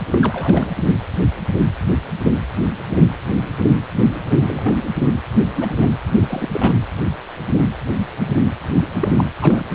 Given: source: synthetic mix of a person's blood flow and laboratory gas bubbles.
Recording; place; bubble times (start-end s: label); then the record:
Doppler ultrasound of blood flow; precordium
0.11-0.69 s: bubbles
4.28-4.76 s: bubbles
5.54-5.75 s: bubbles
5.78-5.92 s: bubbles
6.19-6.49 s: bubbles
6.53-6.73 s: bubbles
9.00-9.27 s: bubbles
9.41-9.66 s: bubbles
From the record:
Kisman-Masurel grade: 222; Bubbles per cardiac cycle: several, 3 to 8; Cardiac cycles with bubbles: 10 to 50%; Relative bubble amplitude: moderate (0.250 to 0.450); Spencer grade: 2 (many but less than half of the cardiac periods contain bubble signals, singularly or in groups); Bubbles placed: anywhere in the cardiac cycle